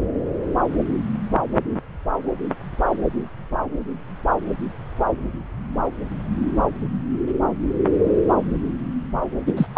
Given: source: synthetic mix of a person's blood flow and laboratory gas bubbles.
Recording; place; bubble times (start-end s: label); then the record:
Doppler ultrasound of blood flow; subclavian vein
9.47-9.54 s: bubbles
9.57-9.67 s: bubbles
9.75-9.78 s: bubbles
From the record:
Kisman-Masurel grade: 213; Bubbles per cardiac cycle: several, 3 to 8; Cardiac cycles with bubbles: 1 to 10%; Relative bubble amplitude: loud (0.450 to 0.775); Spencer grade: 1 (occasional bubble signal discernible with the cardiac motion signal, with majority of cardiac periods free of bubbles); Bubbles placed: anywhere in the cardiac cycle